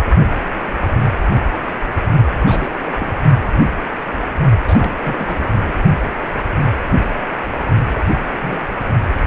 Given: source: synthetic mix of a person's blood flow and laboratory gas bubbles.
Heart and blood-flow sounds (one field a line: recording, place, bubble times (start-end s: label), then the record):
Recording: Doppler ultrasound of blood flow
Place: precordium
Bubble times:
2.40-3.15 s: bubbles
4.67-4.94 s: bubbles
5.04-5.54 s: bubbles
5.66-5.76 s: bubbles
7.95-8.05 s: bubbles
8.13-8.21 s: bubbles
8.34-8.64 s: bubbles
9.14-9.18 s: bubbles
From the record:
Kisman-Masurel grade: 221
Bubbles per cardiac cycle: several, 3 to 8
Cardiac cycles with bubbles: 10 to 50%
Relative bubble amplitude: barely perceptible (0.100 to 0.250)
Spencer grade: 2 (many but less than half of the cardiac periods contain bubble signals, singularly or in groups)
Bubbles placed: only in the low amplitude regions of the cardiac cycle